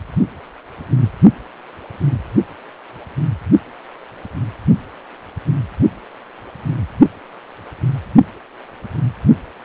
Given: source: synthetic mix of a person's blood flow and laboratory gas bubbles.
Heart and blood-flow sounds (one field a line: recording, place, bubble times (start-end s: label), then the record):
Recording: Doppler ultrasound of blood flow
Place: precordium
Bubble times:
no bubbles
From the record:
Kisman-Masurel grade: 000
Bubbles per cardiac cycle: 0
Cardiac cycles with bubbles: 0%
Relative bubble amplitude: no bubbles discernible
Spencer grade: 0 (complete lack of bubble signals)